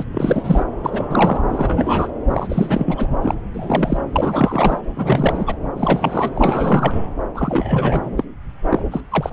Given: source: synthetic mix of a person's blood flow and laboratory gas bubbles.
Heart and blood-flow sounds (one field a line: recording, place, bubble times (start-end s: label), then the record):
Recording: Doppler ultrasound of blood flow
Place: subclavian vein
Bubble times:
0.00-0.04 s: bubbles
0.12-0.63 s: bubbles
0.83-1.40 s: bubbles
1.50-2.11 s: bubbles
2.30-3.07 s: bubbles
3.21-3.35 s: bubbles
3.53-3.97 s: bubbles
4.12-4.80 s: bubbles
4.96-5.56 s: bubbles
5.77-6.30 s: bubbles
6.35-6.92 s: bubbles
7.34-8.25 s: bubbles
8.70-8.85 s: bubbles
8.91-9.01 s: bubbles
9.10-9.30 s: bubbles
From the record:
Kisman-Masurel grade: 343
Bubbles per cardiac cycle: rolling drumbeat, 9 or more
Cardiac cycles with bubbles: 100%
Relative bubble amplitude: loud (0.450 to 0.775)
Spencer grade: 3 (all of the cardiac periods contain showers or single bubble signals, but not dominating or overriding the cardiac motion signals)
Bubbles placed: anywhere in the cardiac cycle